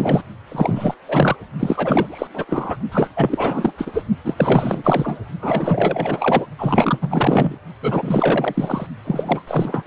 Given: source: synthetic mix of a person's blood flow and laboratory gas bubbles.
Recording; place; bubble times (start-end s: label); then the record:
Doppler ultrasound of blood flow; precordium
0.00-0.21 s: bubbles
0.52-0.95 s: bubbles
1.06-1.36 s: bubbles
1.59-2.27 s: bubbles
2.33-2.46 s: bubbles
2.48-2.77 s: bubbles
2.92-3.08 s: bubbles
3.16-3.72 s: bubbles
3.77-4.04 s: bubbles
4.24-4.34 s: bubbles
4.37-5.20 s: bubbles
5.41-6.46 s: bubbles
6.58-7.56 s: bubbles
7.82-8.87 s: bubbles
9.05-9.43 s: bubbles
9.47-9.83 s: bubbles
From the record:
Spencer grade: 4 (maximum detectable bubble signal sounding continuously throughout systole and diastole of every cardiac period, and overriding the amplitude of the normal cardiac signals); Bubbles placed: only in the low amplitude regions of the cardiac cycle